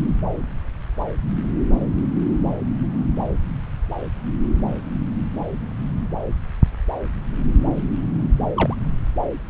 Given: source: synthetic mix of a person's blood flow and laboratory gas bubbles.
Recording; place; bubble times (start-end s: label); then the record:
Doppler ultrasound of blood flow; subclavian vein
8.54-8.76 s: bubbles
From the record:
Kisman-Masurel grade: 112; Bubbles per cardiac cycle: 1 to 2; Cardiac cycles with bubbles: 1 to 10%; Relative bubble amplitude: moderate (0.250 to 0.450); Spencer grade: 1 (occasional bubble signal discernible with the cardiac motion signal, with majority of cardiac periods free of bubbles); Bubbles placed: anywhere in the cardiac cycle